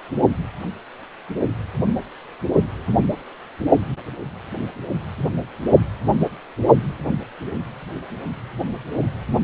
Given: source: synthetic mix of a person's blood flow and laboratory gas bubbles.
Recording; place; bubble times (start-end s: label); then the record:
Doppler ultrasound of blood flow; precordium
no bubbles
From the record:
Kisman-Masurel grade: 000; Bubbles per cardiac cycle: 0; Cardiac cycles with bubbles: 0%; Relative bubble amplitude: no bubbles discernible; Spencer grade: 0 (complete lack of bubble signals)